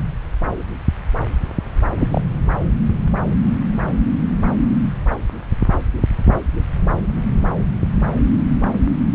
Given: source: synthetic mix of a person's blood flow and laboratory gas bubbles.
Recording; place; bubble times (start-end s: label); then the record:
Doppler ultrasound of blood flow; subclavian vein
1.98-2.08 s: bubbles
2.10-2.21 s: bubbles
From the record:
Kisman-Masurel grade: 112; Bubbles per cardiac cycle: 1 to 2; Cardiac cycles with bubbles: 1 to 10%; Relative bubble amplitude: moderate (0.250 to 0.450); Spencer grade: 1 (occasional bubble signal discernible with the cardiac motion signal, with majority of cardiac periods free of bubbles); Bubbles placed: anywhere in the cardiac cycle